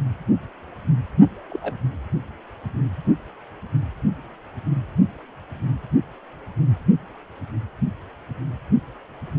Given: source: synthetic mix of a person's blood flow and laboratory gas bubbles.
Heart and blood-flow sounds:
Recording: Doppler ultrasound of blood flow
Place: precordium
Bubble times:
1.49-1.58 s: bubbles
1.61-1.74 s: bubbles
From the record:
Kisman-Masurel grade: 111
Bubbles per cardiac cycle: 1 to 2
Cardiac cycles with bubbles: 1 to 10%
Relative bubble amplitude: barely perceptible (0.100 to 0.250)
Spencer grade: 1 (occasional bubble signal discernible with the cardiac motion signal, with majority of cardiac periods free of bubbles)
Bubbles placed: only in the low amplitude regions of the cardiac cycle

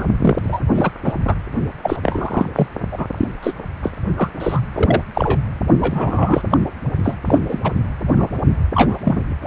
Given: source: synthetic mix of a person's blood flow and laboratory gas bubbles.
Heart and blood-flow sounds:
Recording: Doppler ultrasound of blood flow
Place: precordium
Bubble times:
0.00-0.05 s: bubbles
0.21-0.36 s: bubbles
0.42-0.60 s: bubbles
0.74-0.91 s: bubbles
1.04-1.14 s: bubbles
1.27-1.35 s: bubbles
1.82-1.97 s: bubbles
2.03-2.46 s: bubbles
2.55-2.68 s: bubbles
2.92-3.07 s: bubbles
3.17-3.28 s: bubbles
3.43-3.54 s: bubbles
3.83-3.90 s: bubbles
4.17-4.30 s: bubbles
4.40-4.61 s: bubbles
4.74-5.02 s: bubbles
5.15-5.38 s: bubbles
5.81-6.42 s: bubbles
6.50-6.58 s: bubbles
7.04-7.17 s: bubbles
7.27-7.38 s: bubbles
7.48-7.72 s: bubbles
8.15-8.29 s: bubbles
8.75-8.96 s: bubbles
9.04-9.21 s: bubbles
9.42-9.47 s: bubbles
From the record:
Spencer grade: 3 (all of the cardiac periods contain showers or single bubble signals, but not dominating or overriding the cardiac motion signals)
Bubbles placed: only in the low amplitude regions of the cardiac cycle

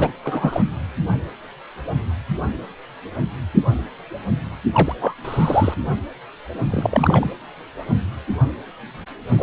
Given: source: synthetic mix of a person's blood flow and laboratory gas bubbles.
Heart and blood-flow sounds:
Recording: Doppler ultrasound of blood flow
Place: precordium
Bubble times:
0.00-0.12 s: bubbles
0.23-0.62 s: bubbles
4.72-4.95 s: bubbles
5.00-5.14 s: bubbles
5.24-5.74 s: bubbles
6.70-7.30 s: bubbles
9.38-9.43 s: bubbles
From the record:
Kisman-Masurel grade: 222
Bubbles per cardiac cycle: several, 3 to 8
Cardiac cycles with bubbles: 10 to 50%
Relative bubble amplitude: moderate (0.250 to 0.450)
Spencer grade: 2 (many but less than half of the cardiac periods contain bubble signals, singularly or in groups)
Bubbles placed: anywhere in the cardiac cycle

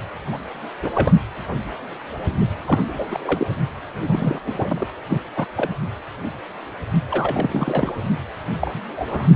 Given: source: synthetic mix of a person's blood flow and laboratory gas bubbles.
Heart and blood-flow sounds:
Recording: Doppler ultrasound of blood flow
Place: precordium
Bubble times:
0.32-0.38 s: bubbles
0.82-0.91 s: bubbles
0.94-1.11 s: bubbles
2.66-2.78 s: bubbles
2.88-3.06 s: bubbles
3.09-3.47 s: bubbles
4.08-4.42 s: bubbles
4.46-4.88 s: bubbles
5.08-5.19 s: bubbles
5.37-5.45 s: bubbles
5.56-5.70 s: bubbles
7.11-7.93 s: bubbles
8.60-8.71 s: bubbles
8.74-8.80 s: bubbles
8.96-9.30 s: bubbles
9.34-9.36 s: bubbles
From the record:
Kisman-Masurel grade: 232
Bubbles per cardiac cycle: several, 3 to 8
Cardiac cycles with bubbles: 50 to 99%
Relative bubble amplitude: moderate (0.250 to 0.450)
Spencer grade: 3 (all of the cardiac periods contain showers or single bubble signals, but not dominating or overriding the cardiac motion signals)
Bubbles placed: anywhere in the cardiac cycle

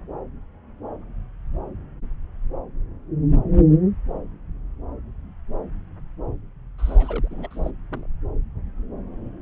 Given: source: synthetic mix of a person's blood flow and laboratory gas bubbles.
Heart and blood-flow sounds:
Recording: Doppler ultrasound of blood flow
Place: subclavian vein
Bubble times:
6.78-7.28 s: bubbles
7.30-7.71 s: bubbles
7.89-8.08 s: bubbles
From the record:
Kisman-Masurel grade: 211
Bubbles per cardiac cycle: several, 3 to 8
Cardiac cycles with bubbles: 1 to 10%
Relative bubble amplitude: barely perceptible (0.100 to 0.250)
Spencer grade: 1 (occasional bubble signal discernible with the cardiac motion signal, with majority of cardiac periods free of bubbles)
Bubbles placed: anywhere in the cardiac cycle

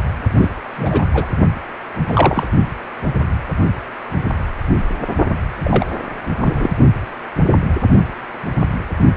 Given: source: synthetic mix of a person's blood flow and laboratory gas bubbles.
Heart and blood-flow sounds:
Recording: Doppler ultrasound of blood flow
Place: precordium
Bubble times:
0.37-0.49 s: bubbles
0.77-1.02 s: bubbles
1.13-1.26 s: bubbles
2.08-2.47 s: bubbles
5.64-5.84 s: bubbles
6.38-6.70 s: bubbles
From the record:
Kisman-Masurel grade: 233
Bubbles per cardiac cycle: several, 3 to 8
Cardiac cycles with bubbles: 50 to 99%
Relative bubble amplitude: loud (0.450 to 0.775)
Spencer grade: 3 (all of the cardiac periods contain showers or single bubble signals, but not dominating or overriding the cardiac motion signals)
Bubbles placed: only in the low amplitude regions of the cardiac cycle

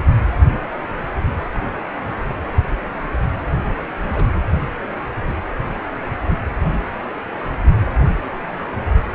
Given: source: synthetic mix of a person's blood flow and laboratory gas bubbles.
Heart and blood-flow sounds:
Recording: Doppler ultrasound of blood flow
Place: precordium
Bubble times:
1.54-1.59 s: bubbles
4.01-4.28 s: bubbles
From the record:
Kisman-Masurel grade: 121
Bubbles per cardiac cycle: 1 to 2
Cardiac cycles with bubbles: 10 to 50%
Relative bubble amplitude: barely perceptible (0.100 to 0.250)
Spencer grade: 2 (many but less than half of the cardiac periods contain bubble signals, singularly or in groups)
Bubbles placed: anywhere in the cardiac cycle

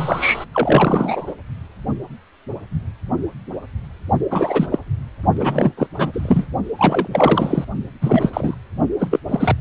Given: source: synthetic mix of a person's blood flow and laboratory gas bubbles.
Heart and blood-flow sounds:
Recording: Doppler ultrasound of blood flow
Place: precordium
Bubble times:
0.00-0.45 s: bubbles
0.53-1.34 s: bubbles
4.30-4.66 s: bubbles
4.71-4.79 s: bubbles
5.37-5.74 s: bubbles
5.78-5.87 s: bubbles
5.97-6.46 s: bubbles
6.78-7.07 s: bubbles
7.12-7.64 s: bubbles
8.01-8.55 s: bubbles
8.99-9.20 s: bubbles
9.28-9.56 s: bubbles
From the record:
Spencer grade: 3 (all of the cardiac periods contain showers or single bubble signals, but not dominating or overriding the cardiac motion signals)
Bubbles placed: only in the low amplitude regions of the cardiac cycle

